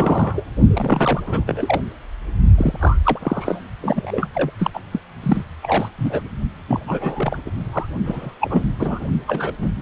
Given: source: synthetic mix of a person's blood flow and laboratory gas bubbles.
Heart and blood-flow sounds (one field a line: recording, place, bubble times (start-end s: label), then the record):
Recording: Doppler ultrasound of blood flow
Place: precordium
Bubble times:
0.00-0.45 s: bubbles
0.72-1.22 s: bubbles
1.26-1.44 s: bubbles
1.46-1.81 s: bubbles
2.58-2.78 s: bubbles
2.81-2.98 s: bubbles
3.04-3.68 s: bubbles
3.82-4.28 s: bubbles
4.34-4.50 s: bubbles
4.58-4.71 s: bubbles
4.74-4.80 s: bubbles
4.91-5.00 s: bubbles
5.22-5.43 s: bubbles
5.62-5.89 s: bubbles
5.98-6.21 s: bubbles
6.68-6.80 s: bubbles
6.87-7.38 s: bubbles
7.46-7.51 s: bubbles
7.54-7.90 s: bubbles
8.05-8.34 s: bubbles
8.41-8.70 s: bubbles
8.79-9.07 s: bubbles
9.27-9.54 s: bubbles
9.62-9.70 s: bubbles
From the record:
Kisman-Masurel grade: 342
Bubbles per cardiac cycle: rolling drumbeat, 9 or more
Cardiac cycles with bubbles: 100%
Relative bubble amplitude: moderate (0.250 to 0.450)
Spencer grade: 3 (all of the cardiac periods contain showers or single bubble signals, but not dominating or overriding the cardiac motion signals)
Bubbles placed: only in the low amplitude regions of the cardiac cycle